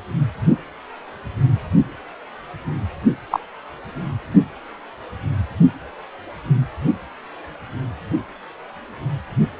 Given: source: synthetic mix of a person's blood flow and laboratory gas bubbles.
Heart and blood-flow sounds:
Doppler ultrasound of blood flow; precordium
3.31-3.40 s: bubbles
From the record:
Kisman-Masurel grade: 113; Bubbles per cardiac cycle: 1 to 2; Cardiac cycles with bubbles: 1 to 10%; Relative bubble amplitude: loud (0.450 to 0.775); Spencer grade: 1 (occasional bubble signal discernible with the cardiac motion signal, with majority of cardiac periods free of bubbles); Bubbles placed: anywhere in the cardiac cycle

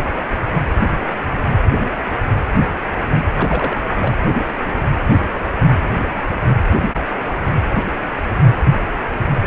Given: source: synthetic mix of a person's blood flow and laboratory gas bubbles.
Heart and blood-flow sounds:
Doppler ultrasound of blood flow; precordium
3.37-3.82 s: bubbles
3.98-4.15 s: bubbles
From the record:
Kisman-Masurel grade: 211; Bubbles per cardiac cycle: several, 3 to 8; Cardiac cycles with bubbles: 1 to 10%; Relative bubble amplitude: barely perceptible (0.100 to 0.250); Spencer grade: 1 (occasional bubble signal discernible with the cardiac motion signal, with majority of cardiac periods free of bubbles); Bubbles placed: anywhere in the cardiac cycle

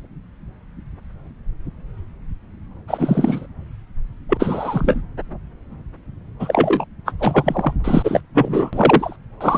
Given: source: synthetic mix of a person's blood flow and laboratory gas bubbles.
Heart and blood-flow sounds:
Doppler ultrasound of blood flow; subclavian vein
2.88-3.47 s: bubbles
4.29-5.01 s: bubbles
6.39-6.84 s: bubbles
7.05-7.12 s: bubbles
7.19-7.73 s: bubbles
7.84-8.21 s: bubbles
8.34-9.16 s: bubbles
9.41-9.58 s: bubbles
From the record:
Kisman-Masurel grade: 223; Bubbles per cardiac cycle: several, 3 to 8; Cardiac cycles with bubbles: 10 to 50%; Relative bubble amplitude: loud (0.450 to 0.775); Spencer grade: 2 (many but less than half of the cardiac periods contain bubble signals, singularly or in groups); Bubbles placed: anywhere in the cardiac cycle

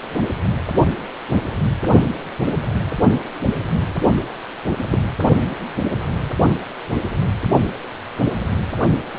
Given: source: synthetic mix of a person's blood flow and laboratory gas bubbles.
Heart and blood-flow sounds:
Doppler ultrasound of blood flow; precordium
4.91-4.99 s: bubbles
From the record:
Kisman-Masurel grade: 112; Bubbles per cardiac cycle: 1 to 2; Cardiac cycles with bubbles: 1 to 10%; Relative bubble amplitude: moderate (0.250 to 0.450); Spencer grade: 1 (occasional bubble signal discernible with the cardiac motion signal, with majority of cardiac periods free of bubbles); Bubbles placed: only in the low amplitude regions of the cardiac cycle

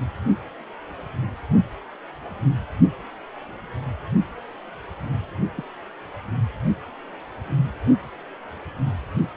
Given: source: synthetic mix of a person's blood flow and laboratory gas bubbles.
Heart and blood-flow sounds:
Doppler ultrasound of blood flow; precordium
5.57-5.64 s: bubbles
From the record:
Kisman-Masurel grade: 111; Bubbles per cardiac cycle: 1 to 2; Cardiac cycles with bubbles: 1 to 10%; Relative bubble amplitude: barely perceptible (0.100 to 0.250); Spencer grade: 1 (occasional bubble signal discernible with the cardiac motion signal, with majority of cardiac periods free of bubbles); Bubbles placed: only in the low amplitude regions of the cardiac cycle

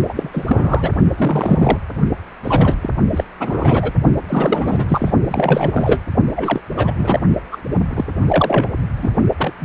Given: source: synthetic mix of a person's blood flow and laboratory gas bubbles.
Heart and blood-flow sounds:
Doppler ultrasound of blood flow; precordium
0.09-0.29 s: bubbles
0.33-0.90 s: bubbles
1.18-1.78 s: bubbles
2.44-2.77 s: bubbles
2.81-2.90 s: bubbles
3.11-3.24 s: bubbles
3.40-3.92 s: bubbles
4.28-5.12 s: bubbles
5.28-6.02 s: bubbles
6.36-6.60 s: bubbles
6.77-6.94 s: bubbles
6.97-7.20 s: bubbles
7.52-7.57 s: bubbles
7.71-7.76 s: bubbles
7.91-8.04 s: bubbles
8.26-8.74 s: bubbles
8.97-9.09 s: bubbles
9.38-9.53 s: bubbles
9.59-9.65 s: bubbles
From the record:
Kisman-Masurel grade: 343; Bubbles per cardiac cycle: rolling drumbeat, 9 or more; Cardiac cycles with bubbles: 100%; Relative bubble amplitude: loud (0.450 to 0.775); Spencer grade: 3 (all of the cardiac periods contain showers or single bubble signals, but not dominating or overriding the cardiac motion signals); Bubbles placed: only in the low amplitude regions of the cardiac cycle

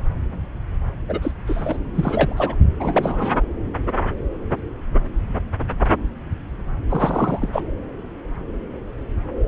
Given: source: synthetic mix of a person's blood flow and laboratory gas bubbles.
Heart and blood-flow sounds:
Doppler ultrasound of blood flow; subclavian vein
1.08-1.31 s: bubbles
1.47-1.77 s: bubbles
1.95-2.55 s: bubbles
2.79-3.43 s: bubbles
6.89-7.62 s: bubbles
From the record:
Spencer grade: 2 (many but less than half of the cardiac periods contain bubble signals, singularly or in groups); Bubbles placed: anywhere in the cardiac cycle

